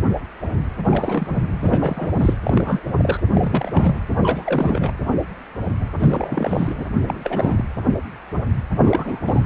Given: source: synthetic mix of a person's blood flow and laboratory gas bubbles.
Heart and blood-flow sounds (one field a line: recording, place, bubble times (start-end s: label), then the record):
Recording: Doppler ultrasound of blood flow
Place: precordium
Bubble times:
0.86-1.43 s: bubbles
1.60-2.11 s: bubbles
2.19-2.34 s: bubbles
2.43-2.82 s: bubbles
2.97-3.19 s: bubbles
3.34-3.95 s: bubbles
4.22-4.92 s: bubbles
6.00-6.74 s: bubbles
6.77-6.85 s: bubbles
7.05-7.65 s: bubbles
8.78-9.45 s: bubbles
From the record:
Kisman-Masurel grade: 332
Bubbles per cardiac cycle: rolling drumbeat, 9 or more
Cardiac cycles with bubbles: 50 to 99%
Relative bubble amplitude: moderate (0.250 to 0.450)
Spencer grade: 3 (all of the cardiac periods contain showers or single bubble signals, but not dominating or overriding the cardiac motion signals)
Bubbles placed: anywhere in the cardiac cycle